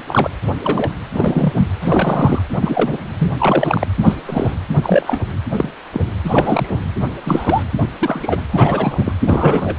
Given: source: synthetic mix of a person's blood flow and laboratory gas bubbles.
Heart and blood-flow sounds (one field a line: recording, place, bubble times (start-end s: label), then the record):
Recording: Doppler ultrasound of blood flow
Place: precordium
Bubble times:
0.07-0.30 s: bubbles
0.63-0.90 s: bubbles
1.13-1.68 s: bubbles
1.82-2.42 s: bubbles
2.55-2.98 s: bubbles
3.19-3.31 s: bubbles
3.38-3.87 s: bubbles
3.97-4.14 s: bubbles
4.26-4.56 s: bubbles
4.83-5.26 s: bubbles
5.53-5.73 s: bubbles
5.93-6.01 s: bubbles
6.26-6.80 s: bubbles
7.26-7.63 s: bubbles
7.99-8.40 s: bubbles
8.53-9.12 s: bubbles
9.24-9.76 s: bubbles
From the record:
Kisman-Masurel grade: 243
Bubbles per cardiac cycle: several, 3 to 8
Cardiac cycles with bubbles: 100%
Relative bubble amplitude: loud (0.450 to 0.775)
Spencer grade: 3 (all of the cardiac periods contain showers or single bubble signals, but not dominating or overriding the cardiac motion signals)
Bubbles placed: anywhere in the cardiac cycle